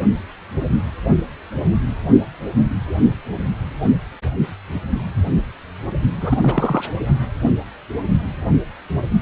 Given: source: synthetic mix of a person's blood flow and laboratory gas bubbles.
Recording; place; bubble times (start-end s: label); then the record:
Doppler ultrasound of blood flow; precordium
6.21-6.37 s: bubbles
6.42-6.83 s: bubbles
From the record:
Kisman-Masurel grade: 212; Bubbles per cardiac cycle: several, 3 to 8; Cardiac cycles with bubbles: 1 to 10%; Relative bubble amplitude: moderate (0.250 to 0.450); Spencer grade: 1 (occasional bubble signal discernible with the cardiac motion signal, with majority of cardiac periods free of bubbles); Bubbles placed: only in the low amplitude regions of the cardiac cycle